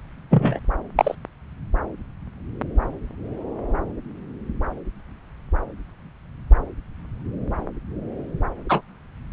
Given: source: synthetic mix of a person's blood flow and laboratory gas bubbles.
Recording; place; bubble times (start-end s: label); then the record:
Doppler ultrasound of blood flow; subclavian vein
0.30-0.59 s: bubbles
0.98-1.15 s: bubbles
8.69-8.81 s: bubbles
From the record:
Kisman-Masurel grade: 123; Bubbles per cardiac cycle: 1 to 2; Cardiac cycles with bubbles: 10 to 50%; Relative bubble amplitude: loud (0.450 to 0.775); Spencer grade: 2 (many but less than half of the cardiac periods contain bubble signals, singularly or in groups); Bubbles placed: anywhere in the cardiac cycle